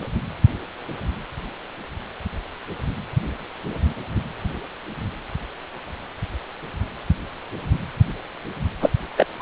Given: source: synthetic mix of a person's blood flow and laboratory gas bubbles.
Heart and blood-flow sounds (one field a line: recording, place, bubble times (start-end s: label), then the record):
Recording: Doppler ultrasound of blood flow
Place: precordium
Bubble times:
8.81-8.89 s: bubbles
9.17-9.26 s: bubbles
9.39-9.42 s: bubbles
From the record:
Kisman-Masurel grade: 213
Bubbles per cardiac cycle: several, 3 to 8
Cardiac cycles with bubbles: 1 to 10%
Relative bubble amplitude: loud (0.450 to 0.775)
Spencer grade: 1 (occasional bubble signal discernible with the cardiac motion signal, with majority of cardiac periods free of bubbles)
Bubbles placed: anywhere in the cardiac cycle